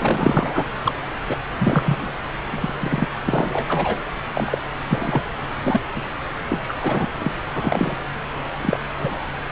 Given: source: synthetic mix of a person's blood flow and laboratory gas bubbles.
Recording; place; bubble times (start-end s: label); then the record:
Doppler ultrasound of blood flow; subclavian vein
0.00-0.66 s: bubbles
0.85-0.99 s: bubbles
1.26-1.35 s: bubbles
1.59-2.12 s: bubbles
2.52-2.73 s: bubbles
2.77-3.08 s: bubbles
3.25-3.97 s: bubbles
4.34-4.58 s: bubbles
4.89-5.22 s: bubbles
5.62-5.80 s: bubbles
5.96-6.02 s: bubbles
6.50-6.75 s: bubbles
6.83-7.09 s: bubbles
7.18-7.31 s: bubbles
7.55-7.97 s: bubbles
8.61-8.79 s: bubbles
8.99-9.18 s: bubbles
From the record:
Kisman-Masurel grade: 243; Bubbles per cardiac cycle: several, 3 to 8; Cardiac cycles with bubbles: 100%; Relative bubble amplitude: loud (0.450 to 0.775); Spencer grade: 3 (all of the cardiac periods contain showers or single bubble signals, but not dominating or overriding the cardiac motion signals); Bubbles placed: anywhere in the cardiac cycle